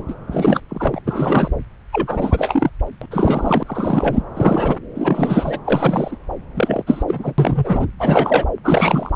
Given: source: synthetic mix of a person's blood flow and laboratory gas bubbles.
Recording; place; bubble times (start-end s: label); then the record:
Doppler ultrasound of blood flow; subclavian vein
0.07-0.14 s: bubbles
0.31-0.60 s: bubbles
0.68-1.00 s: bubbles
1.05-1.51 s: bubbles
1.93-2.70 s: bubbles
3.02-3.06 s: bubbles
3.11-3.63 s: bubbles
3.67-4.23 s: bubbles
4.35-4.77 s: bubbles
4.95-5.59 s: bubbles
5.65-6.16 s: bubbles
6.54-6.83 s: bubbles
6.87-7.03 s: bubbles
7.07-7.33 s: bubbles
7.38-7.87 s: bubbles
7.99-8.45 s: bubbles
8.63-9.11 s: bubbles
From the record:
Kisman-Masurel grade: 342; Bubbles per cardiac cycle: rolling drumbeat, 9 or more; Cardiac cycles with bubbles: 100%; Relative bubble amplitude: moderate (0.250 to 0.450); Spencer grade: 3 (all of the cardiac periods contain showers or single bubble signals, but not dominating or overriding the cardiac motion signals); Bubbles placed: anywhere in the cardiac cycle